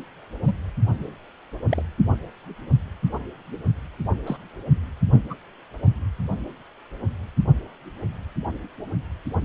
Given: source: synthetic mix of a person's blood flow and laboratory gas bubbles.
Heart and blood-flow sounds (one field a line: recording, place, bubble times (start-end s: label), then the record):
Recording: Doppler ultrasound of blood flow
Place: precordium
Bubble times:
0.47-0.53 s: bubbles
1.69-1.82 s: bubbles
4.26-4.37 s: bubbles
5.29-5.35 s: bubbles
From the record:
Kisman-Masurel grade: 121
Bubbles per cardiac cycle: 1 to 2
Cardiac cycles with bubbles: 10 to 50%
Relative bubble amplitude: barely perceptible (0.100 to 0.250)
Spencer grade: 2 (many but less than half of the cardiac periods contain bubble signals, singularly or in groups)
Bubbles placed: only in the low amplitude regions of the cardiac cycle